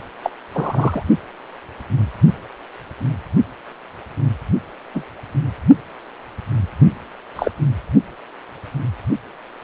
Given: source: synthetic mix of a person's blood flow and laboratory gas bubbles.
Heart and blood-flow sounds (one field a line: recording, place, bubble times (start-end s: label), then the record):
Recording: Doppler ultrasound of blood flow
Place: precordium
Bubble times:
0.23-0.30 s: bubbles
0.53-1.02 s: bubbles
4.94-5.03 s: bubbles
7.36-7.51 s: bubbles
From the record:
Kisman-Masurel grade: 122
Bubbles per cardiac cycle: 1 to 2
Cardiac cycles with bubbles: 10 to 50%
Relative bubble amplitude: moderate (0.250 to 0.450)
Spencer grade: 2 (many but less than half of the cardiac periods contain bubble signals, singularly or in groups)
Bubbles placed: only in the low amplitude regions of the cardiac cycle